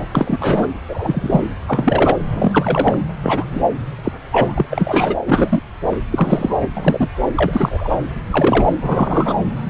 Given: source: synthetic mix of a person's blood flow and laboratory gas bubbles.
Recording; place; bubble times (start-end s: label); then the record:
Doppler ultrasound of blood flow; subclavian vein
0.00-0.08 s: bubbles
0.15-0.68 s: bubbles
0.88-1.45 s: bubbles
1.68-2.17 s: bubbles
2.33-2.98 s: bubbles
3.22-3.44 s: bubbles
3.51-3.61 s: bubbles
4.04-4.12 s: bubbles
4.31-4.66 s: bubbles
4.71-5.16 s: bubbles
5.27-5.62 s: bubbles
6.11-6.57 s: bubbles
6.74-7.08 s: bubbles
7.37-7.97 s: bubbles
8.30-8.72 s: bubbles
8.81-9.37 s: bubbles
From the record:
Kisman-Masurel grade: 243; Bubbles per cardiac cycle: several, 3 to 8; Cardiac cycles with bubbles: 100%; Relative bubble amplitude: loud (0.450 to 0.775); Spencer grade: 3 (all of the cardiac periods contain showers or single bubble signals, but not dominating or overriding the cardiac motion signals); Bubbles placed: anywhere in the cardiac cycle